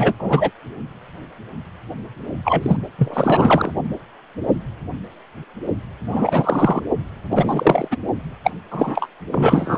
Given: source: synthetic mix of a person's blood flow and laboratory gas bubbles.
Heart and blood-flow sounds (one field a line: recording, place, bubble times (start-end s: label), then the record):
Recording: Doppler ultrasound of blood flow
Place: precordium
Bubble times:
0.00-0.15 s: bubbles
0.19-0.50 s: bubbles
2.44-2.77 s: bubbles
2.98-3.72 s: bubbles
6.09-6.81 s: bubbles
7.30-7.88 s: bubbles
7.91-7.96 s: bubbles
8.43-8.51 s: bubbles
8.71-9.08 s: bubbles
9.32-9.78 s: bubbles
From the record:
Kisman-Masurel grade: 333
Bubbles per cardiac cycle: rolling drumbeat, 9 or more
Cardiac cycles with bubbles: 50 to 99%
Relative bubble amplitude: loud (0.450 to 0.775)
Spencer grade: 3 (all of the cardiac periods contain showers or single bubble signals, but not dominating or overriding the cardiac motion signals)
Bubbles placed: anywhere in the cardiac cycle